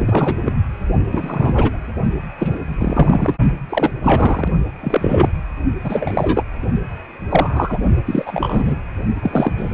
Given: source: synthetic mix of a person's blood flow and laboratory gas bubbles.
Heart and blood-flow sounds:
Doppler ultrasound of blood flow; precordium
0.00-0.36 s: bubbles
0.45-0.57 s: bubbles
1.11-1.80 s: bubbles
2.38-2.58 s: bubbles
2.78-3.37 s: bubbles
3.69-3.93 s: bubbles
4.02-4.48 s: bubbles
4.80-5.29 s: bubbles
5.83-6.43 s: bubbles
7.29-7.78 s: bubbles
8.05-8.75 s: bubbles
9.21-9.74 s: bubbles
From the record:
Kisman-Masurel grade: 243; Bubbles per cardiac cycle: several, 3 to 8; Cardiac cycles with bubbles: 100%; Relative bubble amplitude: loud (0.450 to 0.775); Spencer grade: 3 (all of the cardiac periods contain showers or single bubble signals, but not dominating or overriding the cardiac motion signals); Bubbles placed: only in the low amplitude regions of the cardiac cycle

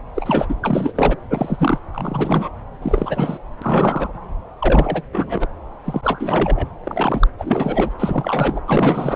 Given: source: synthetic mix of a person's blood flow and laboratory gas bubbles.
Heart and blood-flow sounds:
Doppler ultrasound of blood flow; subclavian vein
0.14-0.54 s: bubbles
0.63-1.16 s: bubbles
1.29-1.78 s: bubbles
1.93-2.49 s: bubbles
2.82-3.38 s: bubbles
3.61-4.12 s: bubbles
4.59-5.02 s: bubbles
5.12-5.47 s: bubbles
5.84-6.67 s: bubbles
6.83-7.27 s: bubbles
7.38-7.90 s: bubbles
7.98-8.62 s: bubbles
8.67-9.16 s: bubbles
From the record:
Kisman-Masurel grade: 343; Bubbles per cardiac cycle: rolling drumbeat, 9 or more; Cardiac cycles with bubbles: 100%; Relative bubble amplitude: loud (0.450 to 0.775); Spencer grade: 3 (all of the cardiac periods contain showers or single bubble signals, but not dominating or overriding the cardiac motion signals); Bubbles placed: anywhere in the cardiac cycle

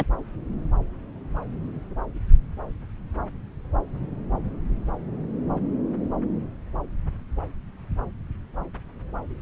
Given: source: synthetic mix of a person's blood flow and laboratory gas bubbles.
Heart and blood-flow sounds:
Doppler ultrasound of blood flow; subclavian vein
0.00-0.04 s: bubbles
From the record:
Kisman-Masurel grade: 213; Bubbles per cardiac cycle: several, 3 to 8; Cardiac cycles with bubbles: 1 to 10%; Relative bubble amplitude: loud (0.450 to 0.775); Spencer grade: 1 (occasional bubble signal discernible with the cardiac motion signal, with majority of cardiac periods free of bubbles); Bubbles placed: anywhere in the cardiac cycle

